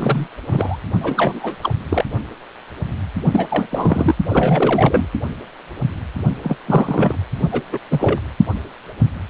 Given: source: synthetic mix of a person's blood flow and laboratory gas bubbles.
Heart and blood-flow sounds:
Doppler ultrasound of blood flow; precordium
0.00-0.27 s: bubbles
0.50-0.77 s: bubbles
1.00-1.55 s: bubbles
1.62-1.74 s: bubbles
1.89-2.05 s: bubbles
3.31-3.48 s: bubbles
3.51-3.67 s: bubbles
3.71-4.15 s: bubbles
4.29-5.07 s: bubbles
6.44-6.56 s: bubbles
6.67-7.16 s: bubbles
7.52-7.62 s: bubbles
7.72-7.79 s: bubbles
7.90-8.20 s: bubbles
From the record:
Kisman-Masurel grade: 332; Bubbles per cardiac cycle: rolling drumbeat, 9 or more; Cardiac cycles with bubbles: 50 to 99%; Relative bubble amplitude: moderate (0.250 to 0.450); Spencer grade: 3 (all of the cardiac periods contain showers or single bubble signals, but not dominating or overriding the cardiac motion signals); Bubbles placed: only in the low amplitude regions of the cardiac cycle

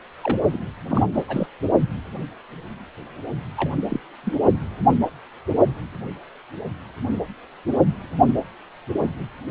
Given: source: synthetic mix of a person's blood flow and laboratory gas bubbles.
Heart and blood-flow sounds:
Doppler ultrasound of blood flow; precordium
0.22-0.39 s: bubbles
0.53-0.59 s: bubbles
0.89-1.03 s: bubbles
1.14-1.47 s: bubbles
3.57-3.77 s: bubbles
3.89-4.00 s: bubbles
4.23-4.34 s: bubbles
From the record:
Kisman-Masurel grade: 221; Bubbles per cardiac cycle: several, 3 to 8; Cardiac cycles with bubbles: 10 to 50%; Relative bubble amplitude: barely perceptible (0.100 to 0.250); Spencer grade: 2 (many but less than half of the cardiac periods contain bubble signals, singularly or in groups); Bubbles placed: only in the low amplitude regions of the cardiac cycle

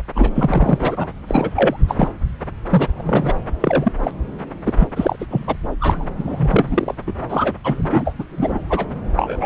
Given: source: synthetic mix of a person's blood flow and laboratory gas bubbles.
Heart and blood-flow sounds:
Doppler ultrasound of blood flow; subclavian vein
0.15-0.31 s: bubbles
0.35-1.07 s: bubbles
1.27-1.50 s: bubbles
1.54-1.78 s: bubbles
1.88-2.08 s: bubbles
2.69-2.88 s: bubbles
2.98-3.37 s: bubbles
3.60-3.93 s: bubbles
3.99-4.11 s: bubbles
4.64-4.73 s: bubbles
4.78-4.88 s: bubbles
4.95-5.16 s: bubbles
5.19-5.25 s: bubbles
5.30-5.56 s: bubbles
5.79-6.05 s: bubbles
6.17-6.94 s: bubbles
7.06-7.13 s: bubbles
7.28-7.54 s: bubbles
7.63-8.14 s: bubbles
8.19-8.25 s: bubbles
8.30-8.89 s: bubbles
9.16-9.46 s: bubbles
From the record:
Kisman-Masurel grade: 343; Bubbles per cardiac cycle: rolling drumbeat, 9 or more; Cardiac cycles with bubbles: 100%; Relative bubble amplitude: loud (0.450 to 0.775); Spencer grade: 3 (all of the cardiac periods contain showers or single bubble signals, but not dominating or overriding the cardiac motion signals); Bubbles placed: anywhere in the cardiac cycle

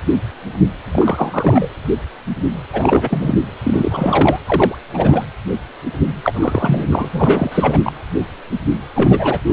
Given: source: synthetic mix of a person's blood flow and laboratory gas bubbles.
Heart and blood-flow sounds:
Doppler ultrasound of blood flow; precordium
0.93-1.68 s: bubbles
2.73-3.35 s: bubbles
3.63-4.39 s: bubbles
4.46-4.75 s: bubbles
4.93-5.25 s: bubbles
6.24-6.87 s: bubbles
6.91-7.09 s: bubbles
7.12-7.79 s: bubbles
7.84-7.93 s: bubbles
8.95-9.40 s: bubbles
9.46-9.53 s: bubbles
From the record:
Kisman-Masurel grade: 333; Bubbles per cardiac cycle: rolling drumbeat, 9 or more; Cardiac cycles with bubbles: 50 to 99%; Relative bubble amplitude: loud (0.450 to 0.775); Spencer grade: 3 (all of the cardiac periods contain showers or single bubble signals, but not dominating or overriding the cardiac motion signals); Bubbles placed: anywhere in the cardiac cycle

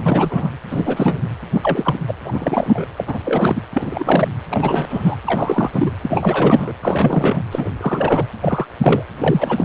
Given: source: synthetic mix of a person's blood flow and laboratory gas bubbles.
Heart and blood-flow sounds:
Doppler ultrasound of blood flow; precordium
0.00-0.52 s: bubbles
0.71-1.28 s: bubbles
1.52-1.99 s: bubbles
2.07-2.15 s: bubbles
2.24-2.85 s: bubbles
2.97-3.04 s: bubbles
3.07-3.18 s: bubbles
3.24-3.61 s: bubbles
3.74-4.28 s: bubbles
4.50-4.87 s: bubbles
4.90-5.17 s: bubbles
5.25-5.71 s: bubbles
5.73-5.91 s: bubbles
6.02-6.73 s: bubbles
6.82-7.42 s: bubbles
7.51-7.70 s: bubbles
7.81-8.26 s: bubbles
8.40-8.66 s: bubbles
8.81-9.03 s: bubbles
9.19-9.65 s: bubbles
From the record:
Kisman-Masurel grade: 343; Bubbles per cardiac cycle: rolling drumbeat, 9 or more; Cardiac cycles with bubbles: 100%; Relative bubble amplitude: loud (0.450 to 0.775); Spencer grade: 3 (all of the cardiac periods contain showers or single bubble signals, but not dominating or overriding the cardiac motion signals); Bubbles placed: anywhere in the cardiac cycle

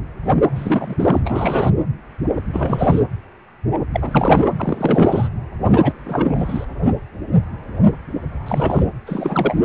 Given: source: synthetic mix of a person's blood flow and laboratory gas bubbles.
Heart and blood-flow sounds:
Doppler ultrasound of blood flow; precordium
0.55-1.21 s: bubbles
1.24-1.70 s: bubbles
2.52-3.00 s: bubbles
3.94-4.50 s: bubbles
4.57-5.29 s: bubbles
5.71-5.93 s: bubbles
6.05-6.65 s: bubbles
8.46-8.89 s: bubbles
9.06-9.63 s: bubbles
From the record:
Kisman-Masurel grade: 332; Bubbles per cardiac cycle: rolling drumbeat, 9 or more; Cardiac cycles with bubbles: 50 to 99%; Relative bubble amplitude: moderate (0.250 to 0.450); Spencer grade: 3 (all of the cardiac periods contain showers or single bubble signals, but not dominating or overriding the cardiac motion signals); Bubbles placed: anywhere in the cardiac cycle

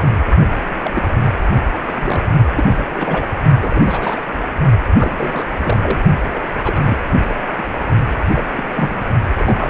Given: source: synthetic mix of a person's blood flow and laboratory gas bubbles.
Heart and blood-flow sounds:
Doppler ultrasound of blood flow; precordium
0.01-0.12 s: bubbles
0.69-0.76 s: bubbles
0.84-0.91 s: bubbles
0.93-1.02 s: bubbles
1.88-2.25 s: bubbles
2.55-3.29 s: bubbles
3.61-4.21 s: bubbles
4.97-5.47 s: bubbles
5.63-5.77 s: bubbles
5.81-5.99 s: bubbles
6.30-6.42 s: bubbles
6.64-6.97 s: bubbles
7.28-7.33 s: bubbles
7.46-7.63 s: bubbles
8.31-8.45 s: bubbles
8.52-8.63 s: bubbles
8.75-9.02 s: bubbles
9.35-9.70 s: bubbles
From the record:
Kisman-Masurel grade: 232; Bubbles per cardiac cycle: several, 3 to 8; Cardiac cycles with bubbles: 50 to 99%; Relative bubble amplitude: moderate (0.250 to 0.450); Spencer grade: 3 (all of the cardiac periods contain showers or single bubble signals, but not dominating or overriding the cardiac motion signals); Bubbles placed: only in the low amplitude regions of the cardiac cycle

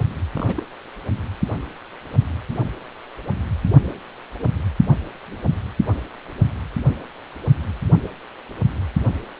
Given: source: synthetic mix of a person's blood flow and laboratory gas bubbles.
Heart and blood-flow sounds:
Doppler ultrasound of blood flow; precordium
0.33-0.60 s: bubbles
From the record:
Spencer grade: 1 (occasional bubble signal discernible with the cardiac motion signal, with majority of cardiac periods free of bubbles); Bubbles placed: anywhere in the cardiac cycle

